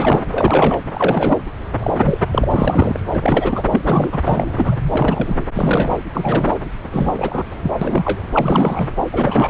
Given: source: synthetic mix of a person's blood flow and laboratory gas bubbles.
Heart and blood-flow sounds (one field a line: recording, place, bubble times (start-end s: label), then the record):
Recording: Doppler ultrasound of blood flow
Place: subclavian vein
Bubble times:
0.00-0.26 s: bubbles
0.31-0.79 s: bubbles
0.93-1.39 s: bubbles
1.80-1.91 s: bubbles
1.95-2.18 s: bubbles
2.31-3.00 s: bubbles
3.13-3.63 s: bubbles
3.72-4.19 s: bubbles
4.25-4.75 s: bubbles
4.91-5.45 s: bubbles
5.54-5.96 s: bubbles
6.13-6.55 s: bubbles
6.91-7.44 s: bubbles
7.62-7.72 s: bubbles
7.81-8.20 s: bubbles
8.33-8.88 s: bubbles
9.12-9.50 s: bubbles
From the record:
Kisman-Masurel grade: 343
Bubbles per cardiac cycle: rolling drumbeat, 9 or more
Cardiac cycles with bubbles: 100%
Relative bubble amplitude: loud (0.450 to 0.775)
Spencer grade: 3 (all of the cardiac periods contain showers or single bubble signals, but not dominating or overriding the cardiac motion signals)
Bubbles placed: anywhere in the cardiac cycle